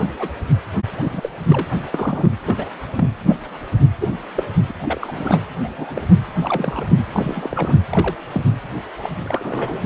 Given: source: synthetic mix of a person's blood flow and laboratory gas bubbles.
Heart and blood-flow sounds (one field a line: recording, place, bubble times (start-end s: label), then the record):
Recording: Doppler ultrasound of blood flow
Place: precordium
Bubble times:
0.00-0.28 s: bubbles
0.96-1.30 s: bubbles
1.48-1.68 s: bubbles
1.92-2.37 s: bubbles
2.43-2.65 s: bubbles
2.98-3.08 s: bubbles
3.27-3.37 s: bubbles
4.00-4.09 s: bubbles
4.35-4.43 s: bubbles
4.68-4.71 s: bubbles
4.80-5.41 s: bubbles
5.64-5.68 s: bubbles
5.76-6.01 s: bubbles
6.42-6.87 s: bubbles
6.89-7.03 s: bubbles
7.12-7.83 s: bubbles
7.89-8.15 s: bubbles
8.32-8.43 s: bubbles
9.01-9.10 s: bubbles
9.24-9.86 s: bubbles
From the record:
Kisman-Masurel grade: 242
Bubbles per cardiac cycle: several, 3 to 8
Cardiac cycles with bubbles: 100%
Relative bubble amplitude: moderate (0.250 to 0.450)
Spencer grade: 3 (all of the cardiac periods contain showers or single bubble signals, but not dominating or overriding the cardiac motion signals)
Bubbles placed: anywhere in the cardiac cycle